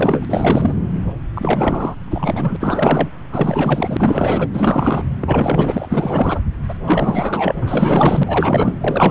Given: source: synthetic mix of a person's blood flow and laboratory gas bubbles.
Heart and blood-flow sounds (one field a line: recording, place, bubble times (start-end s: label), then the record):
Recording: Doppler ultrasound of blood flow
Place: subclavian vein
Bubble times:
0.00-0.74 s: bubbles
1.33-1.95 s: bubbles
2.08-2.56 s: bubbles
2.60-3.11 s: bubbles
3.32-4.47 s: bubbles
4.53-5.04 s: bubbles
5.21-6.40 s: bubbles
6.68-6.74 s: bubbles
6.85-7.55 s: bubbles
7.61-8.23 s: bubbles
8.26-8.74 s: bubbles
8.80-9.11 s: bubbles
From the record:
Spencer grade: 4 (maximum detectable bubble signal sounding continuously throughout systole and diastole of every cardiac period, and overriding the amplitude of the normal cardiac signals)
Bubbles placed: anywhere in the cardiac cycle